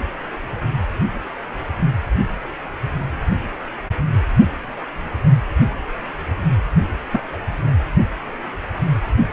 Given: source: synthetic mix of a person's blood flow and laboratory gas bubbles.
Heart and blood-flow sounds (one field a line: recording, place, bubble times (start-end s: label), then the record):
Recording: Doppler ultrasound of blood flow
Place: precordium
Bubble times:
7.12-7.20 s: bubbles
7.33-7.37 s: bubbles
From the record:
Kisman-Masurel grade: 112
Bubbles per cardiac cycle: 1 to 2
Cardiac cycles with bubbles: 1 to 10%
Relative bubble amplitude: moderate (0.250 to 0.450)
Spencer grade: 1 (occasional bubble signal discernible with the cardiac motion signal, with majority of cardiac periods free of bubbles)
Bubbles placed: only in the low amplitude regions of the cardiac cycle